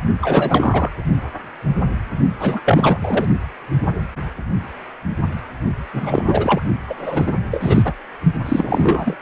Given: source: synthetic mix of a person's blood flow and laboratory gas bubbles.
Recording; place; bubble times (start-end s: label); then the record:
Doppler ultrasound of blood flow; precordium
0.21-0.90 s: bubbles
2.39-2.60 s: bubbles
2.65-3.27 s: bubbles
5.93-6.25 s: bubbles
6.28-6.61 s: bubbles
6.87-6.94 s: bubbles
6.97-7.36 s: bubbles
7.51-7.93 s: bubbles
8.45-9.15 s: bubbles
From the record:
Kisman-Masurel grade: 333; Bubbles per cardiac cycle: rolling drumbeat, 9 or more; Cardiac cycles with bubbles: 50 to 99%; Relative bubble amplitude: loud (0.450 to 0.775); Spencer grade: 3 (all of the cardiac periods contain showers or single bubble signals, but not dominating or overriding the cardiac motion signals); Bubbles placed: only in the low amplitude regions of the cardiac cycle